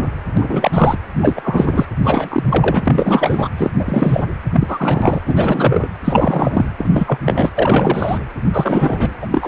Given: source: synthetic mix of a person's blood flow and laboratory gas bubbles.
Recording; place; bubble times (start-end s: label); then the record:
Doppler ultrasound of blood flow; precordium
0.37-0.98 s: bubbles
1.21-1.86 s: bubbles
2.04-2.83 s: bubbles
2.85-3.49 s: bubbles
3.57-3.71 s: bubbles
3.78-4.25 s: bubbles
4.53-5.19 s: bubbles
5.27-5.90 s: bubbles
6.04-6.65 s: bubbles
6.78-7.19 s: bubbles
7.25-7.50 s: bubbles
7.55-8.18 s: bubbles
8.52-9.14 s: bubbles
9.21-9.26 s: bubbles
9.31-9.48 s: bubbles
From the record:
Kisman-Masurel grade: 343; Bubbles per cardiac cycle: rolling drumbeat, 9 or more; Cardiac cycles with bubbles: 100%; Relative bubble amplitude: loud (0.450 to 0.775); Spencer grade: 3 (all of the cardiac periods contain showers or single bubble signals, but not dominating or overriding the cardiac motion signals); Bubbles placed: anywhere in the cardiac cycle